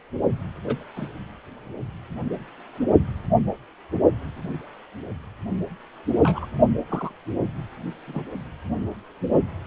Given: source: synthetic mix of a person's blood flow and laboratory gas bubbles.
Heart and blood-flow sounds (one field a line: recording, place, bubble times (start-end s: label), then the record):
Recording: Doppler ultrasound of blood flow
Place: precordium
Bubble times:
0.64-0.82 s: bubbles
0.96-1.08 s: bubbles
6.24-6.46 s: bubbles
6.88-7.12 s: bubbles
8.08-8.24 s: bubbles
From the record:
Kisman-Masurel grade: 121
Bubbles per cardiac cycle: 1 to 2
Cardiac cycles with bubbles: 10 to 50%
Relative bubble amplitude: barely perceptible (0.100 to 0.250)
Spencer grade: 2 (many but less than half of the cardiac periods contain bubble signals, singularly or in groups)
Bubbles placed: only in the low amplitude regions of the cardiac cycle